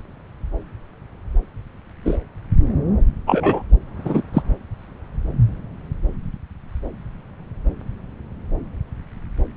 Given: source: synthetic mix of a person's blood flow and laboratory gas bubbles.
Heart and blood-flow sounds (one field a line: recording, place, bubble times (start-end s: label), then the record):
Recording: Doppler ultrasound of blood flow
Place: subclavian vein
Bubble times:
2.04-2.17 s: bubbles
3.27-3.62 s: bubbles
4.04-4.22 s: bubbles
4.33-4.42 s: bubbles
From the record:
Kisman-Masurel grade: 123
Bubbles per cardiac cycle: 1 to 2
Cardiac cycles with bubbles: 10 to 50%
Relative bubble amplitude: loud (0.450 to 0.775)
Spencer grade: 2 (many but less than half of the cardiac periods contain bubble signals, singularly or in groups)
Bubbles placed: anywhere in the cardiac cycle